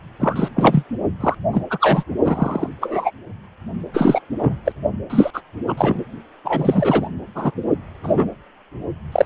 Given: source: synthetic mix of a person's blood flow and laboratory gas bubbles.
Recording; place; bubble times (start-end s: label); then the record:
Doppler ultrasound of blood flow; precordium
0.20-0.48 s: bubbles
0.55-0.84 s: bubbles
1.20-1.34 s: bubbles
1.52-1.62 s: bubbles
1.69-2.04 s: bubbles
2.23-2.69 s: bubbles
2.81-3.11 s: bubbles
3.93-4.21 s: bubbles
4.38-4.55 s: bubbles
4.65-4.72 s: bubbles
5.09-5.30 s: bubbles
5.33-5.42 s: bubbles
5.67-5.75 s: bubbles
5.77-6.04 s: bubbles
6.44-7.08 s: bubbles
7.35-7.51 s: bubbles
8.03-8.27 s: bubbles
9.12-9.25 s: bubbles
From the record:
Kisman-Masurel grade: 243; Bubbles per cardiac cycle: several, 3 to 8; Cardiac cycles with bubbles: 100%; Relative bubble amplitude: loud (0.450 to 0.775); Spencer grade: 3 (all of the cardiac periods contain showers or single bubble signals, but not dominating or overriding the cardiac motion signals); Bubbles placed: only in the low amplitude regions of the cardiac cycle